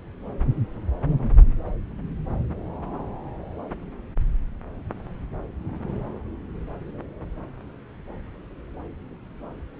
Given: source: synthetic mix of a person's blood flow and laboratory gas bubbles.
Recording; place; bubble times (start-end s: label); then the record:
Doppler ultrasound of blood flow; subclavian vein
no bubbles
From the record:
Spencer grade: 0 (complete lack of bubble signals)